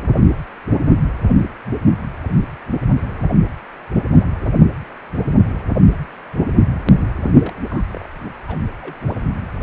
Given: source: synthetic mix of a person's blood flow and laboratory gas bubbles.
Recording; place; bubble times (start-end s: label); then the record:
Doppler ultrasound of blood flow; precordium
7.42-7.53 s: bubbles
7.69-7.83 s: bubbles
7.93-8.07 s: bubbles
8.47-8.59 s: bubbles
8.81-8.94 s: bubbles
9.07-9.16 s: bubbles
From the record:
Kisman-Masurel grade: 211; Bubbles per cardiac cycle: several, 3 to 8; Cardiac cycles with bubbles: 1 to 10%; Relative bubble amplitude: barely perceptible (0.100 to 0.250); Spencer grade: 1 (occasional bubble signal discernible with the cardiac motion signal, with majority of cardiac periods free of bubbles); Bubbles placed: only in the low amplitude regions of the cardiac cycle